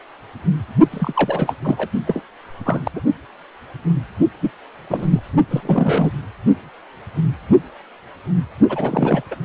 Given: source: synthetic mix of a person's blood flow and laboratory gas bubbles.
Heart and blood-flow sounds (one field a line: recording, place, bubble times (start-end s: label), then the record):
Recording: Doppler ultrasound of blood flow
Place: precordium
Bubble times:
0.91-1.55 s: bubbles
1.64-1.89 s: bubbles
2.07-2.22 s: bubbles
2.65-2.91 s: bubbles
2.96-3.01 s: bubbles
4.41-4.51 s: bubbles
4.90-5.21 s: bubbles
5.50-6.11 s: bubbles
8.68-9.22 s: bubbles
9.31-9.35 s: bubbles
From the record:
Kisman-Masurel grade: 232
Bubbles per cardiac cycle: several, 3 to 8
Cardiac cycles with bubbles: 50 to 99%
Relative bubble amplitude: moderate (0.250 to 0.450)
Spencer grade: 3 (all of the cardiac periods contain showers or single bubble signals, but not dominating or overriding the cardiac motion signals)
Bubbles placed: only in the low amplitude regions of the cardiac cycle